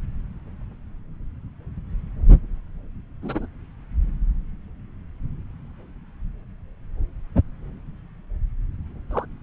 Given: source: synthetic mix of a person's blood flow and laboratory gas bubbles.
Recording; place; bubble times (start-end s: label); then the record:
Doppler ultrasound of blood flow; subclavian vein
3.22-3.46 s: bubbles
9.11-9.25 s: bubbles
From the record:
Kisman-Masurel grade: 121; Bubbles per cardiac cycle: 1 to 2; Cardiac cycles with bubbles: 10 to 50%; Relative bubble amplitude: barely perceptible (0.100 to 0.250); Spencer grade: 2 (many but less than half of the cardiac periods contain bubble signals, singularly or in groups); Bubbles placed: anywhere in the cardiac cycle